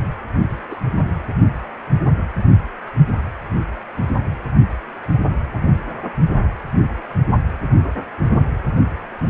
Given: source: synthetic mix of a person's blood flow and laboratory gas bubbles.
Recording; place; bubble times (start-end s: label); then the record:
Doppler ultrasound of blood flow; precordium
0.70-0.76 s: bubbles
From the record:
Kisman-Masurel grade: 112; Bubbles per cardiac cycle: 1 to 2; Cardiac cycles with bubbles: 1 to 10%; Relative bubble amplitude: moderate (0.250 to 0.450); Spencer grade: 1 (occasional bubble signal discernible with the cardiac motion signal, with majority of cardiac periods free of bubbles); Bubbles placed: anywhere in the cardiac cycle